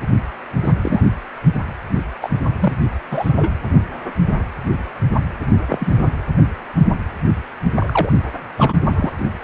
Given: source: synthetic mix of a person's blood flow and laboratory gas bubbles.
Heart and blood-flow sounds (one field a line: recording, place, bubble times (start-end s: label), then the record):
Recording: Doppler ultrasound of blood flow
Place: precordium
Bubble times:
0.64-0.73 s: bubbles
0.82-1.00 s: bubbles
2.21-2.29 s: bubbles
2.60-2.73 s: bubbles
3.11-3.53 s: bubbles
5.69-5.92 s: bubbles
7.74-8.12 s: bubbles
8.57-8.73 s: bubbles
8.96-9.12 s: bubbles
From the record:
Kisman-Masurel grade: 123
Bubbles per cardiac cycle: 1 to 2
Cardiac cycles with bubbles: 10 to 50%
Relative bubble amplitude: loud (0.450 to 0.775)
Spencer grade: 2 (many but less than half of the cardiac periods contain bubble signals, singularly or in groups)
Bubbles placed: only in the low amplitude regions of the cardiac cycle